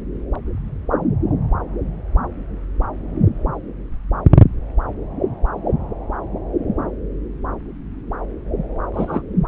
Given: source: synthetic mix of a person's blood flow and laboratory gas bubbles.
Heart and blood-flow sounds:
Doppler ultrasound of blood flow; subclavian vein
8.93-9.22 s: bubbles
From the record:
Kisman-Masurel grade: 212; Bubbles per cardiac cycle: several, 3 to 8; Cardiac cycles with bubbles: 1 to 10%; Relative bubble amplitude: moderate (0.250 to 0.450); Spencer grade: 1 (occasional bubble signal discernible with the cardiac motion signal, with majority of cardiac periods free of bubbles); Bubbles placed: anywhere in the cardiac cycle

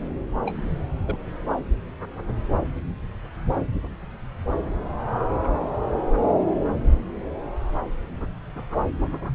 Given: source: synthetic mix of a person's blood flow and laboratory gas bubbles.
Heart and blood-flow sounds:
Doppler ultrasound of blood flow; subclavian vein
0.46-0.62 s: bubbles
1.05-1.19 s: bubbles
5.38-5.53 s: bubbles
From the record:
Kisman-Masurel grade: 121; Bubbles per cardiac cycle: 1 to 2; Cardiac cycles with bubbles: 10 to 50%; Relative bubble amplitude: barely perceptible (0.100 to 0.250); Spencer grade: 2 (many but less than half of the cardiac periods contain bubble signals, singularly or in groups); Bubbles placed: anywhere in the cardiac cycle

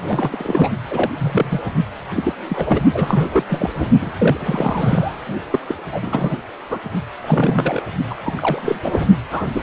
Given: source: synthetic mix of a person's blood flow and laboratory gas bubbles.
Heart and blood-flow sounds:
Doppler ultrasound of blood flow; precordium
0.05-0.74 s: bubbles
0.90-1.10 s: bubbles
1.17-1.60 s: bubbles
2.16-2.33 s: bubbles
2.49-2.81 s: bubbles
2.93-3.44 s: bubbles
3.49-3.71 s: bubbles
3.75-3.88 s: bubbles
4.02-4.12 s: bubbles
4.18-5.24 s: bubbles
5.52-5.59 s: bubbles
5.67-5.75 s: bubbles
5.92-6.37 s: bubbles
6.70-6.79 s: bubbles
7.23-7.81 s: bubbles
8.08-8.14 s: bubbles
8.23-9.06 s: bubbles
9.30-9.46 s: bubbles
9.53-9.63 s: bubbles
From the record:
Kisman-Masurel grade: 342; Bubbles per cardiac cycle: rolling drumbeat, 9 or more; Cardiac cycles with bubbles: 100%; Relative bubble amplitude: moderate (0.250 to 0.450); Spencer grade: 3 (all of the cardiac periods contain showers or single bubble signals, but not dominating or overriding the cardiac motion signals); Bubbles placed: only in the low amplitude regions of the cardiac cycle

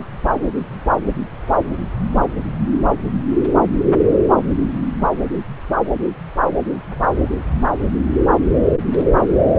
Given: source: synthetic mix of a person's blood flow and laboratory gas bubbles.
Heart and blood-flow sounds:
Doppler ultrasound of blood flow; subclavian vein
no bubbles
From the record:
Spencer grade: 0 (complete lack of bubble signals)

